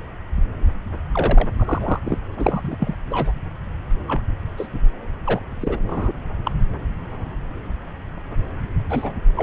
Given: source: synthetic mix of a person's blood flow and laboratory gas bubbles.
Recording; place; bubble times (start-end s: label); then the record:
Doppler ultrasound of blood flow; subclavian vein
1.12-1.49 s: bubbles
1.58-2.00 s: bubbles
2.04-2.18 s: bubbles
2.39-2.75 s: bubbles
2.79-2.94 s: bubbles
3.10-3.31 s: bubbles
4.07-4.21 s: bubbles
4.57-4.67 s: bubbles
5.25-5.42 s: bubbles
5.60-5.79 s: bubbles
5.85-6.11 s: bubbles
6.45-6.51 s: bubbles
8.89-9.12 s: bubbles
9.36-9.43 s: bubbles
From the record:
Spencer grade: 3 (all of the cardiac periods contain showers or single bubble signals, but not dominating or overriding the cardiac motion signals); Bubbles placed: anywhere in the cardiac cycle